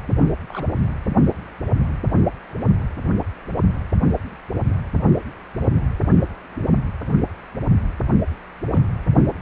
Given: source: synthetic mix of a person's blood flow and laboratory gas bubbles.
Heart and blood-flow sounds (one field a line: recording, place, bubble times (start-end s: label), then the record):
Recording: Doppler ultrasound of blood flow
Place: precordium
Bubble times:
0.07-0.11 s: bubbles
0.48-0.67 s: bubbles
8.71-8.88 s: bubbles
From the record:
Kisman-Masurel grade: 121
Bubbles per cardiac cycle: 1 to 2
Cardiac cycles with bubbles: 10 to 50%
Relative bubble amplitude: barely perceptible (0.100 to 0.250)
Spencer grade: 2 (many but less than half of the cardiac periods contain bubble signals, singularly or in groups)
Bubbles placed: only in the low amplitude regions of the cardiac cycle